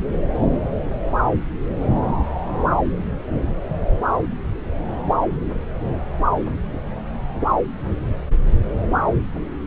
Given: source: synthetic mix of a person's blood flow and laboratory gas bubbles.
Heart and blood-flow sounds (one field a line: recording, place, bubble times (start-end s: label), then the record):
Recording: Doppler ultrasound of blood flow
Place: subclavian vein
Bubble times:
no bubbles
From the record:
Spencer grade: 0 (complete lack of bubble signals)